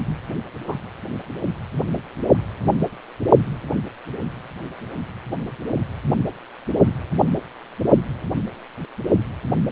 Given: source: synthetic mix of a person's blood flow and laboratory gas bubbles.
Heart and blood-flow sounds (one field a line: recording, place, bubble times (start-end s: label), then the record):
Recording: Doppler ultrasound of blood flow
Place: precordium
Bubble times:
0.68-0.76 s: bubbles
From the record:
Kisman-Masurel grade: 121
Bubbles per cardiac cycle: 1 to 2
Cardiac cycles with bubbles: 10 to 50%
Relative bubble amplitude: barely perceptible (0.100 to 0.250)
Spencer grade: 2 (many but less than half of the cardiac periods contain bubble signals, singularly or in groups)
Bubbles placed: only in the low amplitude regions of the cardiac cycle